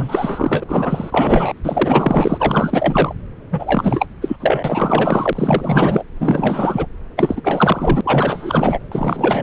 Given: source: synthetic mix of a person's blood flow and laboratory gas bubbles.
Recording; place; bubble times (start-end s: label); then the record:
Doppler ultrasound of blood flow; subclavian vein
0.00-0.64 s: bubbles
0.69-1.54 s: bubbles
1.64-3.14 s: bubbles
3.51-4.07 s: bubbles
4.21-4.37 s: bubbles
4.40-6.04 s: bubbles
6.20-6.86 s: bubbles
7.16-7.41 s: bubbles
7.44-8.01 s: bubbles
8.04-8.79 s: bubbles
8.92-9.43 s: bubbles
From the record:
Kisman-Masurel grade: 444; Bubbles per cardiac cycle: continuous sound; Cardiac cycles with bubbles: 100%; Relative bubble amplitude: maximal (0.775 to 0.999); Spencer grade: 4 (maximum detectable bubble signal sounding continuously throughout systole and diastole of every cardiac period, and overriding the amplitude of the normal cardiac signals); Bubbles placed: anywhere in the cardiac cycle